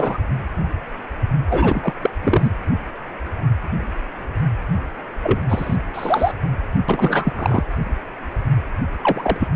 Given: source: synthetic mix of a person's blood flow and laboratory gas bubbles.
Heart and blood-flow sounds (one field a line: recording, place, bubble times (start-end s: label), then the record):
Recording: Doppler ultrasound of blood flow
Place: precordium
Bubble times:
0.00-0.18 s: bubbles
1.49-1.93 s: bubbles
2.02-2.10 s: bubbles
2.22-2.51 s: bubbles
5.23-5.41 s: bubbles
5.49-5.77 s: bubbles
5.94-6.33 s: bubbles
6.88-7.33 s: bubbles
7.35-7.63 s: bubbles
9.03-9.47 s: bubbles
From the record:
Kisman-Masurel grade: 232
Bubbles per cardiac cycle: several, 3 to 8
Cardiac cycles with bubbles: 50 to 99%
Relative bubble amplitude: moderate (0.250 to 0.450)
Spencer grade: 3 (all of the cardiac periods contain showers or single bubble signals, but not dominating or overriding the cardiac motion signals)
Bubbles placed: anywhere in the cardiac cycle